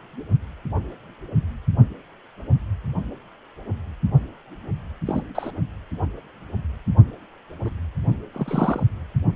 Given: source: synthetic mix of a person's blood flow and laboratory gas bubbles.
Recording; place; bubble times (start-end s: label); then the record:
Doppler ultrasound of blood flow; precordium
5.07-5.22 s: bubbles
5.35-5.51 s: bubbles
7.64-7.70 s: bubbles
8.33-8.83 s: bubbles
From the record:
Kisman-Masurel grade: 122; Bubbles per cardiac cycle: 1 to 2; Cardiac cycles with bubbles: 10 to 50%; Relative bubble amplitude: moderate (0.250 to 0.450); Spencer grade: 2 (many but less than half of the cardiac periods contain bubble signals, singularly or in groups); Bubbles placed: only in the low amplitude regions of the cardiac cycle